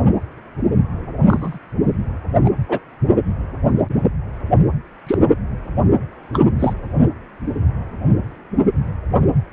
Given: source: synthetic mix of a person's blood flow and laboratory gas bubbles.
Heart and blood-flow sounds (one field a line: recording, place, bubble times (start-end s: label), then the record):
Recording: Doppler ultrasound of blood flow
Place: precordium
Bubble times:
1.27-1.58 s: bubbles
2.43-2.50 s: bubbles
2.68-2.79 s: bubbles
5.06-5.18 s: bubbles
6.33-6.41 s: bubbles
6.59-6.73 s: bubbles
From the record:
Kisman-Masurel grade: 122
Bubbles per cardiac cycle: 1 to 2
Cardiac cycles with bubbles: 10 to 50%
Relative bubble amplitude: moderate (0.250 to 0.450)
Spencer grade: 2 (many but less than half of the cardiac periods contain bubble signals, singularly or in groups)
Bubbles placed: anywhere in the cardiac cycle